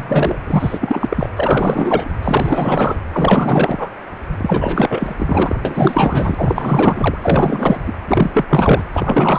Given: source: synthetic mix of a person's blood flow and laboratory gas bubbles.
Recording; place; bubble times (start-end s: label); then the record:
Doppler ultrasound of blood flow; precordium
0.00-0.35 s: bubbles
0.47-1.29 s: bubbles
1.36-2.09 s: bubbles
2.23-3.00 s: bubbles
3.12-3.90 s: bubbles
4.37-5.56 s: bubbles
5.65-7.18 s: bubbles
7.21-7.93 s: bubbles
8.07-8.45 s: bubbles
8.50-8.84 s: bubbles
8.92-9.39 s: bubbles
From the record:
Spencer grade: 4 (maximum detectable bubble signal sounding continuously throughout systole and diastole of every cardiac period, and overriding the amplitude of the normal cardiac signals); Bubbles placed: anywhere in the cardiac cycle